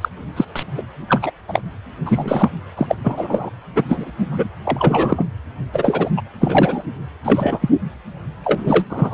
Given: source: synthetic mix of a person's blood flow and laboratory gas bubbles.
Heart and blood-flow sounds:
Doppler ultrasound of blood flow; precordium
0.01-0.09 s: bubbles
0.36-0.45 s: bubbles
0.56-0.63 s: bubbles
0.77-0.83 s: bubbles
1.08-1.31 s: bubbles
1.48-1.62 s: bubbles
2.05-2.52 s: bubbles
2.77-2.96 s: bubbles
3.03-3.50 s: bubbles
3.75-3.83 s: bubbles
3.88-4.12 s: bubbles
4.31-4.47 s: bubbles
4.64-5.26 s: bubbles
5.73-6.09 s: bubbles
6.17-6.21 s: bubbles
6.41-6.83 s: bubbles
7.25-7.69 s: bubbles
8.44-8.86 s: bubbles
8.89-9.14 s: bubbles
From the record:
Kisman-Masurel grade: 243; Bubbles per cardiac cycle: several, 3 to 8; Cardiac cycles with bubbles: 100%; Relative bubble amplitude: loud (0.450 to 0.775); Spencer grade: 3 (all of the cardiac periods contain showers or single bubble signals, but not dominating or overriding the cardiac motion signals); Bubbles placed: anywhere in the cardiac cycle

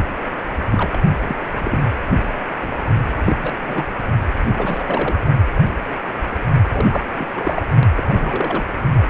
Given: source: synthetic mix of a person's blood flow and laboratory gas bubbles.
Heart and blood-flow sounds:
Doppler ultrasound of blood flow; precordium
0.70-1.01 s: bubbles
1.27-1.37 s: bubbles
1.58-1.79 s: bubbles
2.62-2.74 s: bubbles
3.15-3.37 s: bubbles
3.42-3.54 s: bubbles
3.67-3.86 s: bubbles
4.46-4.84 s: bubbles
4.86-5.21 s: bubbles
6.69-7.07 s: bubbles
7.18-7.26 s: bubbles
7.33-7.61 s: bubbles
7.95-8.04 s: bubbles
8.06-8.63 s: bubbles
From the record:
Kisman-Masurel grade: 232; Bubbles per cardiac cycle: several, 3 to 8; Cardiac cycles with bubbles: 50 to 99%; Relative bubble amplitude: moderate (0.250 to 0.450); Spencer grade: 3 (all of the cardiac periods contain showers or single bubble signals, but not dominating or overriding the cardiac motion signals); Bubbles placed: only in the low amplitude regions of the cardiac cycle

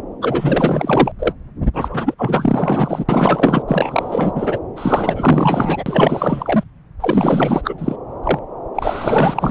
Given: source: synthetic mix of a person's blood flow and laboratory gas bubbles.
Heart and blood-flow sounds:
Doppler ultrasound of blood flow; subclavian vein
0.21-1.12 s: bubbles
1.19-1.33 s: bubbles
1.74-2.15 s: bubbles
2.18-3.04 s: bubbles
3.08-3.62 s: bubbles
3.68-4.59 s: bubbles
4.76-6.64 s: bubbles
7.00-7.75 s: bubbles
7.78-7.96 s: bubbles
8.23-8.39 s: bubbles
8.75-9.51 s: bubbles
From the record:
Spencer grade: 4 (maximum detectable bubble signal sounding continuously throughout systole and diastole of every cardiac period, and overriding the amplitude of the normal cardiac signals); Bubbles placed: anywhere in the cardiac cycle

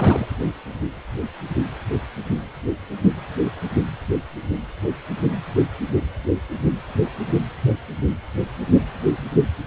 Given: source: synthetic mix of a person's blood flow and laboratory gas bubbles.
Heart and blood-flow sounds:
Doppler ultrasound of blood flow; precordium
0.00-0.26 s: bubbles
From the record:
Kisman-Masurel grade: 212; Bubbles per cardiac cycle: several, 3 to 8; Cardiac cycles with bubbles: 1 to 10%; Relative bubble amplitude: moderate (0.250 to 0.450); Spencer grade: 1 (occasional bubble signal discernible with the cardiac motion signal, with majority of cardiac periods free of bubbles); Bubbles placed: anywhere in the cardiac cycle

